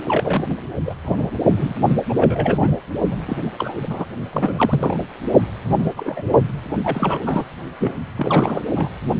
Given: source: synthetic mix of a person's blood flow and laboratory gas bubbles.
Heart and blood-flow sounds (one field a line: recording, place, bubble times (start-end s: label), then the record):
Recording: Doppler ultrasound of blood flow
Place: precordium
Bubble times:
0.08-0.43 s: bubbles
0.47-0.55 s: bubbles
0.85-0.95 s: bubbles
1.05-1.28 s: bubbles
1.56-1.74 s: bubbles
1.86-1.97 s: bubbles
2.08-2.76 s: bubbles
3.10-3.17 s: bubbles
3.20-3.50 s: bubbles
3.58-3.75 s: bubbles
3.82-4.05 s: bubbles
4.33-4.97 s: bubbles
5.79-5.85 s: bubbles
5.96-6.42 s: bubbles
6.83-7.20 s: bubbles
7.25-7.45 s: bubbles
7.81-7.92 s: bubbles
8.16-8.62 s: bubbles
8.75-8.89 s: bubbles
From the record:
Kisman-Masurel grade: 242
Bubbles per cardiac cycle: several, 3 to 8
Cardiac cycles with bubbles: 100%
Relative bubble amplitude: moderate (0.250 to 0.450)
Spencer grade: 3 (all of the cardiac periods contain showers or single bubble signals, but not dominating or overriding the cardiac motion signals)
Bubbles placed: only in the low amplitude regions of the cardiac cycle